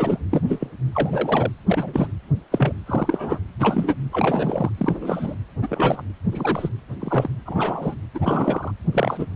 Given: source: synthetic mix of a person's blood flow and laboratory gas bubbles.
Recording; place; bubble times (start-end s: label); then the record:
Doppler ultrasound of blood flow; precordium
0.00-0.18 s: bubbles
0.31-0.42 s: bubbles
0.48-0.67 s: bubbles
0.91-1.52 s: bubbles
1.68-2.08 s: bubbles
2.52-2.74 s: bubbles
2.86-3.38 s: bubbles
3.60-3.94 s: bubbles
4.12-4.71 s: bubbles
4.78-5.36 s: bubbles
5.62-6.01 s: bubbles
6.32-6.69 s: bubbles
7.00-7.29 s: bubbles
7.46-7.95 s: bubbles
8.14-8.71 s: bubbles
8.92-9.26 s: bubbles
From the record:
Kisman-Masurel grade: 242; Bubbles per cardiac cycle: several, 3 to 8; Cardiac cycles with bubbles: 100%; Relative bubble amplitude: moderate (0.250 to 0.450); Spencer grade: 3 (all of the cardiac periods contain showers or single bubble signals, but not dominating or overriding the cardiac motion signals); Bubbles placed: anywhere in the cardiac cycle